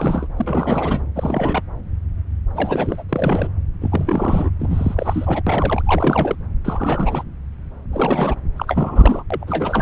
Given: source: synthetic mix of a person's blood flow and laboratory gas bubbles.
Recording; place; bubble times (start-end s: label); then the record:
Doppler ultrasound of blood flow; subclavian vein
0.00-0.27 s: bubbles
0.36-1.06 s: bubbles
1.15-1.62 s: bubbles
2.54-3.04 s: bubbles
3.09-3.49 s: bubbles
3.81-4.50 s: bubbles
4.58-5.42 s: bubbles
5.46-5.83 s: bubbles
5.86-6.36 s: bubbles
6.65-7.23 s: bubbles
7.92-8.35 s: bubbles
8.56-9.23 s: bubbles
9.30-9.82 s: bubbles
From the record:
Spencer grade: 3 (all of the cardiac periods contain showers or single bubble signals, but not dominating or overriding the cardiac motion signals); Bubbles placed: anywhere in the cardiac cycle